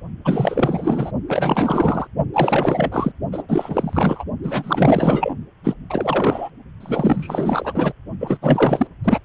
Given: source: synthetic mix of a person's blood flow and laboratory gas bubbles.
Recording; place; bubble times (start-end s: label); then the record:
Doppler ultrasound of blood flow; precordium
0.24-1.11 s: bubbles
1.28-2.07 s: bubbles
2.33-3.12 s: bubbles
3.32-3.43 s: bubbles
3.48-4.25 s: bubbles
4.43-5.35 s: bubbles
5.63-5.73 s: bubbles
5.89-6.50 s: bubbles
6.80-7.93 s: bubbles
8.20-8.38 s: bubbles
8.41-8.87 s: bubbles
9.04-9.20 s: bubbles
From the record:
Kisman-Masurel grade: 444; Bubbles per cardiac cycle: continuous sound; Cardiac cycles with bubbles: 100%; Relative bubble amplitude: maximal (0.775 to 0.999); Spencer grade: 4 (maximum detectable bubble signal sounding continuously throughout systole and diastole of every cardiac period, and overriding the amplitude of the normal cardiac signals); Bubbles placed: only in the low amplitude regions of the cardiac cycle